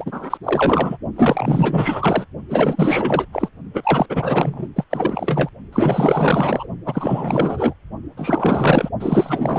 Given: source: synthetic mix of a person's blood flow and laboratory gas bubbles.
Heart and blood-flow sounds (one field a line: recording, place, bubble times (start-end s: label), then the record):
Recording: Doppler ultrasound of blood flow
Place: precordium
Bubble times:
0.00-0.38 s: bubbles
0.43-0.97 s: bubbles
1.16-2.25 s: bubbles
2.49-3.25 s: bubbles
3.32-3.48 s: bubbles
3.73-4.06 s: bubbles
4.09-4.69 s: bubbles
4.75-4.84 s: bubbles
4.91-5.49 s: bubbles
5.72-6.67 s: bubbles
6.86-7.74 s: bubbles
8.17-8.89 s: bubbles
8.99-9.59 s: bubbles
From the record:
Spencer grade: 4 (maximum detectable bubble signal sounding continuously throughout systole and diastole of every cardiac period, and overriding the amplitude of the normal cardiac signals)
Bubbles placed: only in the low amplitude regions of the cardiac cycle